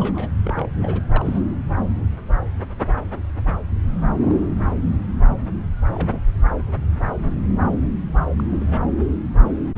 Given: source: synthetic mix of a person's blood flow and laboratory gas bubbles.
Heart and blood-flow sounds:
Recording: Doppler ultrasound of blood flow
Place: subclavian vein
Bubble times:
0.00-0.31 s: bubbles
0.45-0.67 s: bubbles
0.82-1.06 s: bubbles
1.09-1.40 s: bubbles
4.21-4.50 s: bubbles
4.58-4.71 s: bubbles
5.88-6.21 s: bubbles
8.36-8.44 s: bubbles
8.50-8.79 s: bubbles
From the record:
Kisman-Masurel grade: 221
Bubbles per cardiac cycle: several, 3 to 8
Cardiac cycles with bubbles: 10 to 50%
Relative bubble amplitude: barely perceptible (0.100 to 0.250)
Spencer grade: 2 (many but less than half of the cardiac periods contain bubble signals, singularly or in groups)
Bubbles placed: anywhere in the cardiac cycle

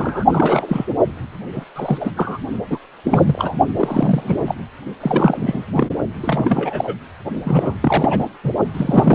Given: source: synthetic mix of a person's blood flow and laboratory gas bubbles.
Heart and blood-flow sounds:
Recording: Doppler ultrasound of blood flow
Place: precordium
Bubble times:
0.00-0.24 s: bubbles
0.31-0.85 s: bubbles
1.52-1.64 s: bubbles
1.75-2.12 s: bubbles
2.16-2.38 s: bubbles
2.70-2.78 s: bubbles
3.04-3.55 s: bubbles
3.77-4.43 s: bubbles
4.46-4.55 s: bubbles
5.00-5.65 s: bubbles
5.72-5.88 s: bubbles
6.23-6.96 s: bubbles
7.43-7.74 s: bubbles
7.80-8.25 s: bubbles
8.44-8.51 s: bubbles
8.73-9.15 s: bubbles
From the record:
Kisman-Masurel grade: 332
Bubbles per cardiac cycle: rolling drumbeat, 9 or more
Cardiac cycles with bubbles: 50 to 99%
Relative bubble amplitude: moderate (0.250 to 0.450)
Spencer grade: 3 (all of the cardiac periods contain showers or single bubble signals, but not dominating or overriding the cardiac motion signals)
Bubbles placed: only in the low amplitude regions of the cardiac cycle

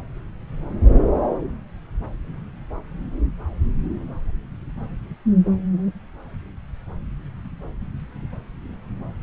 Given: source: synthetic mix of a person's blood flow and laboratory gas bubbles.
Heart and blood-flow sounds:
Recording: Doppler ultrasound of blood flow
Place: subclavian vein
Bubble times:
no bubbles
From the record:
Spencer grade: 0 (complete lack of bubble signals)

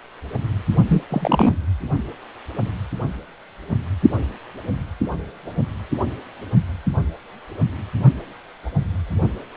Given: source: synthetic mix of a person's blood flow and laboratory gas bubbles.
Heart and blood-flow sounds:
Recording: Doppler ultrasound of blood flow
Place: precordium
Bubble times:
0.89-1.02 s: bubbles
1.10-1.54 s: bubbles
From the record:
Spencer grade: 1 (occasional bubble signal discernible with the cardiac motion signal, with majority of cardiac periods free of bubbles)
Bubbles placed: only in the low amplitude regions of the cardiac cycle

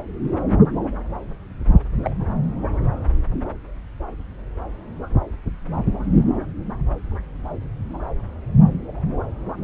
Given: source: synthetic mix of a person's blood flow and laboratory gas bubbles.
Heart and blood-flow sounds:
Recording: Doppler ultrasound of blood flow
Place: subclavian vein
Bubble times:
2.04-2.10 s: bubbles
From the record:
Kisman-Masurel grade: 121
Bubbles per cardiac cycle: 1 to 2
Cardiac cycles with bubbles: 10 to 50%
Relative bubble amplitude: barely perceptible (0.100 to 0.250)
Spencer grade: 2 (many but less than half of the cardiac periods contain bubble signals, singularly or in groups)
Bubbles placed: anywhere in the cardiac cycle

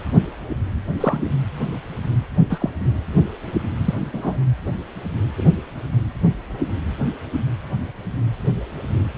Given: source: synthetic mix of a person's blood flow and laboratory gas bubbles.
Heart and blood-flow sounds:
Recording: Doppler ultrasound of blood flow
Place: precordium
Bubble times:
1.00-1.28 s: bubbles
2.50-2.70 s: bubbles
3.84-3.95 s: bubbles
4.13-4.37 s: bubbles
5.38-5.51 s: bubbles
From the record:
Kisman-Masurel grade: 122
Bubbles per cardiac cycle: 1 to 2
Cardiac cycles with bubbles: 10 to 50%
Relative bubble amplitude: moderate (0.250 to 0.450)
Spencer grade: 2 (many but less than half of the cardiac periods contain bubble signals, singularly or in groups)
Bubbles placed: anywhere in the cardiac cycle

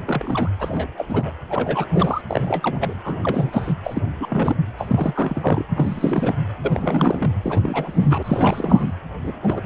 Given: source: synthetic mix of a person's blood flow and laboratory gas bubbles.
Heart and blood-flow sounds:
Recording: Doppler ultrasound of blood flow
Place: precordium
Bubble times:
0.05-0.48 s: bubbles
0.59-0.88 s: bubbles
0.97-1.32 s: bubbles
1.50-1.86 s: bubbles
1.92-2.21 s: bubbles
2.29-2.98 s: bubbles
3.04-3.17 s: bubbles
3.23-3.73 s: bubbles
3.83-4.02 s: bubbles
4.20-4.57 s: bubbles
4.78-5.64 s: bubbles
5.70-6.33 s: bubbles
6.62-7.34 s: bubbles
7.43-8.94 s: bubbles
9.23-9.32 s: bubbles
9.42-9.66 s: bubbles
From the record:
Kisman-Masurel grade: 332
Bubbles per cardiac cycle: rolling drumbeat, 9 or more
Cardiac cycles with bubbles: 50 to 99%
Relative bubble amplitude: moderate (0.250 to 0.450)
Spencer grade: 3 (all of the cardiac periods contain showers or single bubble signals, but not dominating or overriding the cardiac motion signals)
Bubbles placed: anywhere in the cardiac cycle

